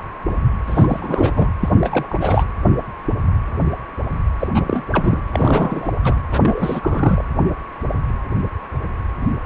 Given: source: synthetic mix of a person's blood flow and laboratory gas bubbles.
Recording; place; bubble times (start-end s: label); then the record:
Doppler ultrasound of blood flow; precordium
0.67-1.31 s: bubbles
1.35-1.50 s: bubbles
1.62-2.44 s: bubbles
4.39-4.48 s: bubbles
4.54-4.84 s: bubbles
4.91-5.21 s: bubbles
5.32-5.93 s: bubbles
6.04-6.16 s: bubbles
6.32-7.24 s: bubbles
From the record:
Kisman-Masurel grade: 332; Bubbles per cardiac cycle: rolling drumbeat, 9 or more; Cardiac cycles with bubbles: 50 to 99%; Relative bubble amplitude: moderate (0.250 to 0.450); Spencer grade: 3 (all of the cardiac periods contain showers or single bubble signals, but not dominating or overriding the cardiac motion signals); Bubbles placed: anywhere in the cardiac cycle